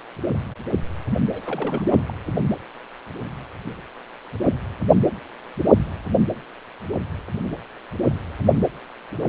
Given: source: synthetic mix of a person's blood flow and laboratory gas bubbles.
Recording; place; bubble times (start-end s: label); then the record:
Doppler ultrasound of blood flow; precordium
1.32-1.99 s: bubbles
2.07-2.14 s: bubbles
From the record:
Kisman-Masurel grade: 211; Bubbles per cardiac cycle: several, 3 to 8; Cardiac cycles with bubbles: 1 to 10%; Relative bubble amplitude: barely perceptible (0.100 to 0.250); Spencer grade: 1 (occasional bubble signal discernible with the cardiac motion signal, with majority of cardiac periods free of bubbles); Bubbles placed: anywhere in the cardiac cycle